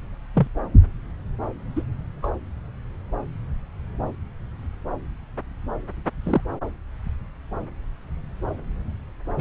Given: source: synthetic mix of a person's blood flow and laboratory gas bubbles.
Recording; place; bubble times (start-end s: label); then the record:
Doppler ultrasound of blood flow; subclavian vein
0.35-0.48 s: bubbles
1.75-1.83 s: bubbles
2.23-2.31 s: bubbles
6.24-6.41 s: bubbles
9.37-9.41 s: bubbles
From the record:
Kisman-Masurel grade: 122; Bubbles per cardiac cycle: 1 to 2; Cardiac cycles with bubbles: 10 to 50%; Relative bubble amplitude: moderate (0.250 to 0.450); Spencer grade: 2 (many but less than half of the cardiac periods contain bubble signals, singularly or in groups); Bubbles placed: anywhere in the cardiac cycle